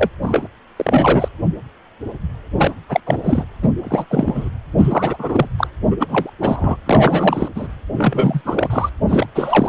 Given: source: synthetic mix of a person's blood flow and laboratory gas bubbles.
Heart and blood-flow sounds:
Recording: Doppler ultrasound of blood flow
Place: precordium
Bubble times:
0.00-0.09 s: bubbles
0.22-0.48 s: bubbles
0.76-1.28 s: bubbles
2.56-2.71 s: bubbles
2.88-3.00 s: bubbles
3.06-3.17 s: bubbles
3.23-3.44 s: bubbles
3.62-3.69 s: bubbles
3.83-4.07 s: bubbles
4.11-4.49 s: bubbles
4.77-5.46 s: bubbles
5.58-5.67 s: bubbles
5.90-5.96 s: bubbles
6.00-6.29 s: bubbles
6.41-6.76 s: bubbles
6.86-7.49 s: bubbles
7.55-7.67 s: bubbles
7.95-8.41 s: bubbles
8.45-8.89 s: bubbles
9.08-9.27 s: bubbles
9.35-9.69 s: bubbles
From the record:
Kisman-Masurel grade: 333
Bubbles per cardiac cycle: rolling drumbeat, 9 or more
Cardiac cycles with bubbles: 50 to 99%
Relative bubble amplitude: loud (0.450 to 0.775)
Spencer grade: 3 (all of the cardiac periods contain showers or single bubble signals, but not dominating or overriding the cardiac motion signals)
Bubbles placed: anywhere in the cardiac cycle

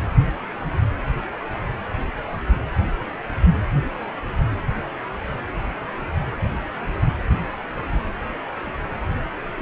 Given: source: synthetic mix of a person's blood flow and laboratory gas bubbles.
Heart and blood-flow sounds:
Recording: Doppler ultrasound of blood flow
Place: precordium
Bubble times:
no bubbles
From the record:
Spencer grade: 0 (complete lack of bubble signals)

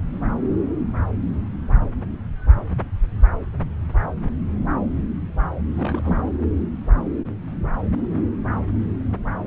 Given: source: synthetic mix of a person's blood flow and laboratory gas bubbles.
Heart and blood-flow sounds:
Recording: Doppler ultrasound of blood flow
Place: subclavian vein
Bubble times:
5.75-6.30 s: bubbles
From the record:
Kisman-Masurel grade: 221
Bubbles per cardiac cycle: several, 3 to 8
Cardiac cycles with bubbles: 10 to 50%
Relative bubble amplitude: barely perceptible (0.100 to 0.250)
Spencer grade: 2 (many but less than half of the cardiac periods contain bubble signals, singularly or in groups)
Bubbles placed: anywhere in the cardiac cycle

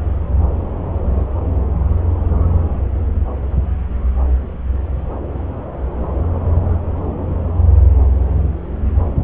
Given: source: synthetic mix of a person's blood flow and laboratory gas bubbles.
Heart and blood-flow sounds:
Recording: Doppler ultrasound of blood flow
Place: subclavian vein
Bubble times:
no bubbles
From the record:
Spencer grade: 0 (complete lack of bubble signals)

